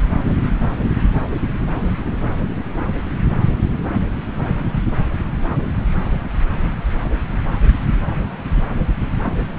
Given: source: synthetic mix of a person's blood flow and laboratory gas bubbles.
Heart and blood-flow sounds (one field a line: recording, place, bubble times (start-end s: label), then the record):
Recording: Doppler ultrasound of blood flow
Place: subclavian vein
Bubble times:
no bubbles
From the record:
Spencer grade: 0 (complete lack of bubble signals)